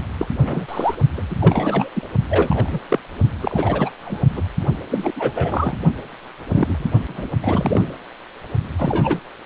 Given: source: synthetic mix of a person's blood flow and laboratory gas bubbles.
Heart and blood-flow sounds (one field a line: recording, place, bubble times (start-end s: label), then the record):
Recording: Doppler ultrasound of blood flow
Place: precordium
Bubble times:
0.18-0.27 s: bubbles
0.40-0.95 s: bubbles
1.17-1.22 s: bubbles
1.30-1.36 s: bubbles
1.41-1.90 s: bubbles
1.95-2.08 s: bubbles
2.29-2.79 s: bubbles
2.89-2.99 s: bubbles
3.40-3.90 s: bubbles
4.03-4.46 s: bubbles
4.91-5.12 s: bubbles
5.16-5.33 s: bubbles
5.35-5.78 s: bubbles
6.47-6.88 s: bubbles
7.08-7.28 s: bubbles
7.42-7.95 s: bubbles
8.79-9.20 s: bubbles
From the record:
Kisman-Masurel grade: 242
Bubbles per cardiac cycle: several, 3 to 8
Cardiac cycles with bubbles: 100%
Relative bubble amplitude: moderate (0.250 to 0.450)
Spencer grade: 3 (all of the cardiac periods contain showers or single bubble signals, but not dominating or overriding the cardiac motion signals)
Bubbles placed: only in the low amplitude regions of the cardiac cycle